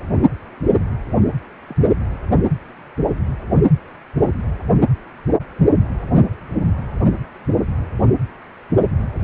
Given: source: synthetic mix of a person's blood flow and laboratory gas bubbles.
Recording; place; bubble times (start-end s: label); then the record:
Doppler ultrasound of blood flow; precordium
1.68-1.76 s: bubbles
From the record:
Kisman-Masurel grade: 121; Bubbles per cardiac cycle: 1 to 2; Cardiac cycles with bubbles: 10 to 50%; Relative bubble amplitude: barely perceptible (0.100 to 0.250); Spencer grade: 2 (many but less than half of the cardiac periods contain bubble signals, singularly or in groups); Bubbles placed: only in the low amplitude regions of the cardiac cycle